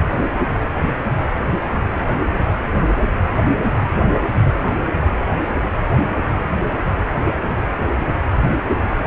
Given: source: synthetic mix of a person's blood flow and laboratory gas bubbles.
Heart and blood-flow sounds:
Doppler ultrasound of blood flow; precordium
8.40-8.61 s: bubbles
From the record:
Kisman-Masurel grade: 112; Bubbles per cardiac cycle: 1 to 2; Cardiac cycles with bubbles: 1 to 10%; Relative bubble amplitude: moderate (0.250 to 0.450); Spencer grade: 1 (occasional bubble signal discernible with the cardiac motion signal, with majority of cardiac periods free of bubbles); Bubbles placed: anywhere in the cardiac cycle

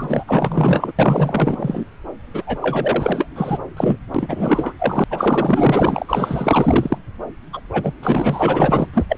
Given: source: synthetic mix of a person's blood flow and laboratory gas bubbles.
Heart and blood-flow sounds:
Doppler ultrasound of blood flow; subclavian vein
0.00-0.24 s: bubbles
0.27-0.92 s: bubbles
0.99-1.86 s: bubbles
2.33-2.43 s: bubbles
2.46-2.58 s: bubbles
2.62-3.28 s: bubbles
3.35-3.58 s: bubbles
3.77-3.97 s: bubbles
4.14-4.73 s: bubbles
4.79-5.04 s: bubbles
5.10-6.98 s: bubbles
7.52-7.60 s: bubbles
7.72-7.93 s: bubbles
8.02-8.87 s: bubbles
8.93-9.04 s: bubbles
9.08-9.17 s: bubbles
From the record:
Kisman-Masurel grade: 444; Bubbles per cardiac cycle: continuous sound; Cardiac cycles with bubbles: 100%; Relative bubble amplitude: maximal (0.775 to 0.999); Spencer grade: 4 (maximum detectable bubble signal sounding continuously throughout systole and diastole of every cardiac period, and overriding the amplitude of the normal cardiac signals); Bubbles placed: anywhere in the cardiac cycle

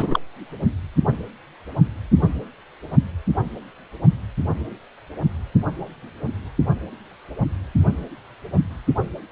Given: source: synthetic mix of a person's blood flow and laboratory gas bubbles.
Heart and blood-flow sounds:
Doppler ultrasound of blood flow; precordium
0.00-0.19 s: bubbles
From the record:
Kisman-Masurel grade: 212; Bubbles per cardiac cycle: several, 3 to 8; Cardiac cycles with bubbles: 1 to 10%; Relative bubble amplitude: moderate (0.250 to 0.450); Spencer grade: 1 (occasional bubble signal discernible with the cardiac motion signal, with majority of cardiac periods free of bubbles); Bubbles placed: only in the low amplitude regions of the cardiac cycle

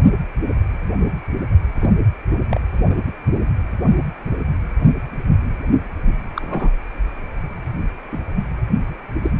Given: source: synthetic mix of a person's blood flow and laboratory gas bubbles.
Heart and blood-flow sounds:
Doppler ultrasound of blood flow; precordium
1.75-1.90 s: bubbles
2.49-2.60 s: bubbles
2.90-2.94 s: bubbles
6.36-6.71 s: bubbles
8.12-8.18 s: bubbles
9.22-9.30 s: bubbles
From the record:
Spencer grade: 2 (many but less than half of the cardiac periods contain bubble signals, singularly or in groups); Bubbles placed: anywhere in the cardiac cycle

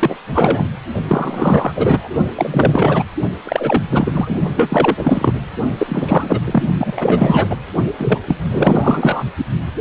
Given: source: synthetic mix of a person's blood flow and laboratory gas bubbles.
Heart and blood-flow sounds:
Doppler ultrasound of blood flow; precordium
0.00-0.16 s: bubbles
0.33-0.68 s: bubbles
1.08-2.09 s: bubbles
2.35-3.04 s: bubbles
3.44-3.83 s: bubbles
3.89-4.41 s: bubbles
4.58-5.33 s: bubbles
5.78-6.40 s: bubbles
6.45-6.63 s: bubbles
6.78-7.58 s: bubbles
7.98-8.18 s: bubbles
8.27-8.36 s: bubbles
8.51-9.25 s: bubbles
From the record:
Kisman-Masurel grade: 333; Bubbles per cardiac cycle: rolling drumbeat, 9 or more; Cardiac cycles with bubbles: 50 to 99%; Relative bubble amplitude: loud (0.450 to 0.775); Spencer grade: 3 (all of the cardiac periods contain showers or single bubble signals, but not dominating or overriding the cardiac motion signals); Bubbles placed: only in the low amplitude regions of the cardiac cycle

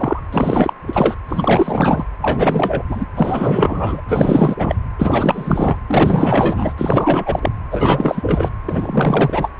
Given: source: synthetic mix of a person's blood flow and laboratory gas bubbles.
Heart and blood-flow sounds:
Doppler ultrasound of blood flow; precordium
0.00-0.20 s: bubbles
0.33-0.73 s: bubbles
0.87-1.15 s: bubbles
1.28-2.05 s: bubbles
2.21-2.83 s: bubbles
2.90-3.06 s: bubbles
3.16-4.01 s: bubbles
4.08-4.55 s: bubbles
4.58-4.75 s: bubbles
4.99-5.79 s: bubbles
5.87-6.73 s: bubbles
6.78-7.51 s: bubbles
7.71-8.51 s: bubbles
8.69-9.49 s: bubbles
9.58-9.60 s: bubbles
From the record:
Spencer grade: 4 (maximum detectable bubble signal sounding continuously throughout systole and diastole of every cardiac period, and overriding the amplitude of the normal cardiac signals); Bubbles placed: anywhere in the cardiac cycle

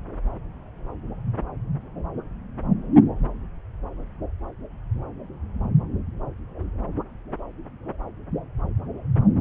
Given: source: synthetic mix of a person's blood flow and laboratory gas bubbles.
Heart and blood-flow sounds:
Doppler ultrasound of blood flow; subclavian vein
no bubbles
From the record:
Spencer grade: 0 (complete lack of bubble signals)

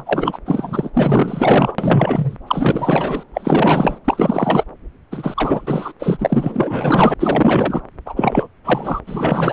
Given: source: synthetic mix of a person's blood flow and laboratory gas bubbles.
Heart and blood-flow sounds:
Doppler ultrasound of blood flow; subclavian vein
0.00-0.39 s: bubbles
0.46-0.90 s: bubbles
0.94-1.75 s: bubbles
1.78-2.38 s: bubbles
2.47-3.23 s: bubbles
3.33-3.99 s: bubbles
4.04-4.64 s: bubbles
5.11-5.92 s: bubbles
5.99-7.14 s: bubbles
7.19-7.81 s: bubbles
8.05-8.48 s: bubbles
8.64-9.01 s: bubbles
9.06-9.53 s: bubbles
From the record:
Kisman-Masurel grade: 444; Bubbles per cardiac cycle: continuous sound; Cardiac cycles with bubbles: 100%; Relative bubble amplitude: maximal (0.775 to 0.999); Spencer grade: 4 (maximum detectable bubble signal sounding continuously throughout systole and diastole of every cardiac period, and overriding the amplitude of the normal cardiac signals); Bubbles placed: anywhere in the cardiac cycle

